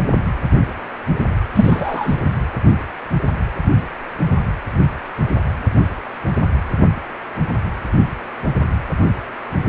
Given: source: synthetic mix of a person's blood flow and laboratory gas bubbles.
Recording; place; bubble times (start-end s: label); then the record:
Doppler ultrasound of blood flow; precordium
1.54-2.16 s: bubbles
From the record:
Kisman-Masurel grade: 113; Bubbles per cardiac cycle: 1 to 2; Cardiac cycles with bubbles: 1 to 10%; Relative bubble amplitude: loud (0.450 to 0.775); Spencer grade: 1 (occasional bubble signal discernible with the cardiac motion signal, with majority of cardiac periods free of bubbles); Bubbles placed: anywhere in the cardiac cycle